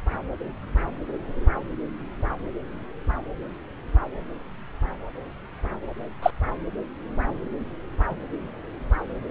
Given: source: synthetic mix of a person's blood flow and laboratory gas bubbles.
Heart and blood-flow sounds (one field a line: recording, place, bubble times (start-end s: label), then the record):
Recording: Doppler ultrasound of blood flow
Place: subclavian vein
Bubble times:
6.22-6.30 s: bubbles
From the record:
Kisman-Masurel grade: 123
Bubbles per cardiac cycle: 1 to 2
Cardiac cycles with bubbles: 10 to 50%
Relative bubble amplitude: loud (0.450 to 0.775)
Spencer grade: 2 (many but less than half of the cardiac periods contain bubble signals, singularly or in groups)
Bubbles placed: anywhere in the cardiac cycle